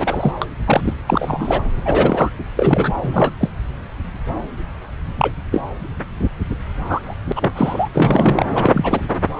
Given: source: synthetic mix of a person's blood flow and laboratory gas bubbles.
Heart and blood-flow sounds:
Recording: Doppler ultrasound of blood flow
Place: subclavian vein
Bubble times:
0.00-0.32 s: bubbles
0.42-0.46 s: bubbles
0.65-0.94 s: bubbles
1.07-1.62 s: bubbles
1.85-2.31 s: bubbles
2.56-2.92 s: bubbles
3.02-3.32 s: bubbles
3.40-3.50 s: bubbles
5.17-5.31 s: bubbles
5.51-5.62 s: bubbles
6.86-7.16 s: bubbles
7.26-7.33 s: bubbles
7.36-7.51 s: bubbles
7.55-7.89 s: bubbles
7.93-8.45 s: bubbles
8.54-9.01 s: bubbles
From the record:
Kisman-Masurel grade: 233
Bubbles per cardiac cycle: several, 3 to 8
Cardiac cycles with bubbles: 50 to 99%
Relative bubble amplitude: loud (0.450 to 0.775)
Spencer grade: 3 (all of the cardiac periods contain showers or single bubble signals, but not dominating or overriding the cardiac motion signals)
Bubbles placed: anywhere in the cardiac cycle

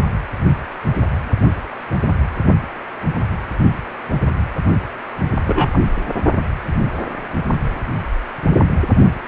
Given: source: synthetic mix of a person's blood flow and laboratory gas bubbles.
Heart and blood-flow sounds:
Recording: Doppler ultrasound of blood flow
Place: precordium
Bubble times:
5.46-5.79 s: bubbles
From the record:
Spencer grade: 1 (occasional bubble signal discernible with the cardiac motion signal, with majority of cardiac periods free of bubbles)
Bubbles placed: only in the low amplitude regions of the cardiac cycle

